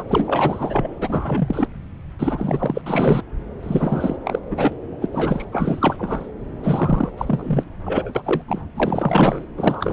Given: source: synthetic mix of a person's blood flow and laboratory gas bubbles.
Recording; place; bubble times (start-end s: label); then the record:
Doppler ultrasound of blood flow; subclavian vein
0.00-0.04 s: bubbles
0.08-0.96 s: bubbles
1.00-1.68 s: bubbles
2.19-2.82 s: bubbles
2.86-3.22 s: bubbles
3.62-4.17 s: bubbles
4.24-4.39 s: bubbles
4.50-4.75 s: bubbles
5.01-5.06 s: bubbles
5.12-5.45 s: bubbles
5.52-6.28 s: bubbles
6.62-7.11 s: bubbles
7.17-7.63 s: bubbles
7.83-8.42 s: bubbles
8.47-8.62 s: bubbles
8.75-9.46 s: bubbles
9.57-9.92 s: bubbles
From the record:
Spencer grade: 4 (maximum detectable bubble signal sounding continuously throughout systole and diastole of every cardiac period, and overriding the amplitude of the normal cardiac signals); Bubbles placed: anywhere in the cardiac cycle